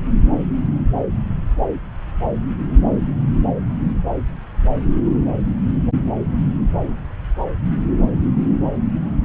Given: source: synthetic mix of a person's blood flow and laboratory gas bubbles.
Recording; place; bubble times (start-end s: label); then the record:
Doppler ultrasound of blood flow; subclavian vein
no bubbles
From the record:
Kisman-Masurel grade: 000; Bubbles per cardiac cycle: 0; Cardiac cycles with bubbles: 0%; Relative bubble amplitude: no bubbles discernible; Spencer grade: 0 (complete lack of bubble signals)